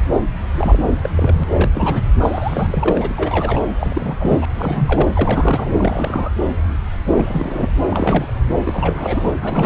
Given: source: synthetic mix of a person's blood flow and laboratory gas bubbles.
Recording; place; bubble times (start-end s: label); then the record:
Doppler ultrasound of blood flow; subclavian vein
0.52-0.82 s: bubbles
1.02-1.09 s: bubbles
1.15-1.44 s: bubbles
1.53-1.71 s: bubbles
1.74-2.02 s: bubbles
2.20-3.60 s: bubbles
3.79-4.16 s: bubbles
4.18-4.46 s: bubbles
4.54-5.07 s: bubbles
5.15-5.72 s: bubbles
5.77-6.31 s: bubbles
7.17-7.69 s: bubbles
7.89-8.32 s: bubbles
8.54-8.62 s: bubbles
8.65-9.33 s: bubbles
9.40-9.65 s: bubbles
From the record:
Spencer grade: 3 (all of the cardiac periods contain showers or single bubble signals, but not dominating or overriding the cardiac motion signals); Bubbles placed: anywhere in the cardiac cycle